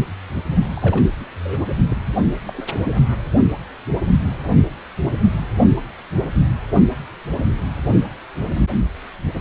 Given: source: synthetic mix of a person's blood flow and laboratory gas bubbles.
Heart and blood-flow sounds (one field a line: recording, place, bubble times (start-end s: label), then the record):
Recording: Doppler ultrasound of blood flow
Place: precordium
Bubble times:
0.77-1.09 s: bubbles
1.19-1.26 s: bubbles
1.44-1.61 s: bubbles
1.89-1.96 s: bubbles
2.48-2.95 s: bubbles
From the record:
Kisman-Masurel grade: 221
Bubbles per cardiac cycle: several, 3 to 8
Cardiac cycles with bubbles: 10 to 50%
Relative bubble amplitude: barely perceptible (0.100 to 0.250)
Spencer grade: 2 (many but less than half of the cardiac periods contain bubble signals, singularly or in groups)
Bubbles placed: only in the low amplitude regions of the cardiac cycle